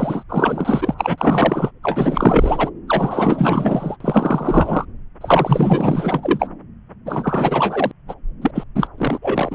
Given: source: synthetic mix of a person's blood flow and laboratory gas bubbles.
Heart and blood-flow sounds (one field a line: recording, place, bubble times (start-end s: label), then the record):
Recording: Doppler ultrasound of blood flow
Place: subclavian vein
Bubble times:
0.00-0.23 s: bubbles
0.29-0.94 s: bubbles
0.97-1.71 s: bubbles
1.83-2.71 s: bubbles
2.88-3.97 s: bubbles
4.00-4.85 s: bubbles
5.21-6.48 s: bubbles
7.05-7.92 s: bubbles
8.08-8.14 s: bubbles
8.41-8.51 s: bubbles
8.54-8.63 s: bubbles
8.75-8.87 s: bubbles
8.97-9.18 s: bubbles
9.21-9.55 s: bubbles
From the record:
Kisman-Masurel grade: 444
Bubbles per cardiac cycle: continuous sound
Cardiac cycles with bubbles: 100%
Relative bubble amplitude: maximal (0.775 to 0.999)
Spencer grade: 4 (maximum detectable bubble signal sounding continuously throughout systole and diastole of every cardiac period, and overriding the amplitude of the normal cardiac signals)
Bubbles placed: anywhere in the cardiac cycle